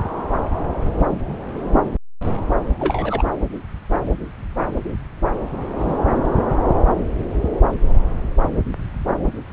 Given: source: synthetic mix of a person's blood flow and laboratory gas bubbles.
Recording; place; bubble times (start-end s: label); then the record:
Doppler ultrasound of blood flow; subclavian vein
2.79-3.24 s: bubbles
5.79-5.96 s: bubbles
From the record:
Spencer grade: 2 (many but less than half of the cardiac periods contain bubble signals, singularly or in groups); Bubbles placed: anywhere in the cardiac cycle